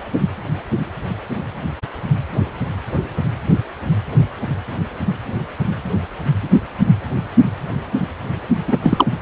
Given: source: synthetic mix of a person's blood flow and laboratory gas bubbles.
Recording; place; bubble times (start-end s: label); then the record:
Doppler ultrasound of blood flow; precordium
8.67-8.77 s: bubbles
8.83-9.05 s: bubbles
From the record:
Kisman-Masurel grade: 213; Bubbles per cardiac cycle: several, 3 to 8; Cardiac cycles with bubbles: 1 to 10%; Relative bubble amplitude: loud (0.450 to 0.775); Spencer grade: 1 (occasional bubble signal discernible with the cardiac motion signal, with majority of cardiac periods free of bubbles); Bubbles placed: anywhere in the cardiac cycle